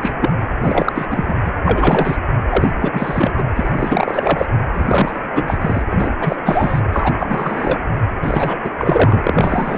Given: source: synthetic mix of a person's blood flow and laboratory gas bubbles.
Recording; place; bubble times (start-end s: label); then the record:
Doppler ultrasound of blood flow; precordium
0.02-0.14 s: bubbles
0.20-0.30 s: bubbles
0.62-0.92 s: bubbles
0.95-1.06 s: bubbles
1.10-1.34 s: bubbles
1.45-1.52 s: bubbles
1.65-2.17 s: bubbles
2.49-2.73 s: bubbles
2.81-2.90 s: bubbles
2.93-3.32 s: bubbles
3.36-3.44 s: bubbles
3.55-4.46 s: bubbles
4.74-5.21 s: bubbles
5.35-5.58 s: bubbles
5.61-5.83 s: bubbles
5.90-6.10 s: bubbles
6.20-6.36 s: bubbles
6.46-6.80 s: bubbles
6.92-7.13 s: bubbles
7.18-7.81 s: bubbles
8.22-8.58 s: bubbles
8.64-8.71 s: bubbles
8.78-9.78 s: bubbles
From the record:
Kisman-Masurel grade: 343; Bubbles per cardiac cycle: rolling drumbeat, 9 or more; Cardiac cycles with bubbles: 100%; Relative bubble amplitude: loud (0.450 to 0.775); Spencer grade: 3 (all of the cardiac periods contain showers or single bubble signals, but not dominating or overriding the cardiac motion signals); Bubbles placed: anywhere in the cardiac cycle